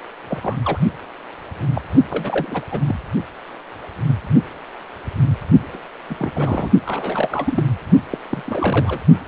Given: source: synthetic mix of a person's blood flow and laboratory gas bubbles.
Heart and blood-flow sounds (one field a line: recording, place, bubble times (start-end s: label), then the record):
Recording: Doppler ultrasound of blood flow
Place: precordium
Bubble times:
0.29-0.56 s: bubbles
0.65-0.78 s: bubbles
1.73-1.81 s: bubbles
2.10-2.62 s: bubbles
2.71-2.99 s: bubbles
5.73-5.78 s: bubbles
6.09-6.30 s: bubbles
6.35-6.71 s: bubbles
6.86-7.62 s: bubbles
8.12-8.18 s: bubbles
8.29-9.00 s: bubbles
From the record:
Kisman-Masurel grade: 232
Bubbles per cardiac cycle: several, 3 to 8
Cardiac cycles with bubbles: 50 to 99%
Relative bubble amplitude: moderate (0.250 to 0.450)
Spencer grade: 3 (all of the cardiac periods contain showers or single bubble signals, but not dominating or overriding the cardiac motion signals)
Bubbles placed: only in the low amplitude regions of the cardiac cycle